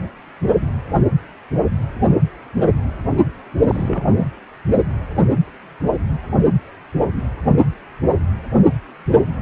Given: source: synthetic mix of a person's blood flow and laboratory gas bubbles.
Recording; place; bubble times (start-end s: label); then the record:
Doppler ultrasound of blood flow; precordium
3.67-4.27 s: bubbles
From the record:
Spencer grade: 2 (many but less than half of the cardiac periods contain bubble signals, singularly or in groups); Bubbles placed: only in the low amplitude regions of the cardiac cycle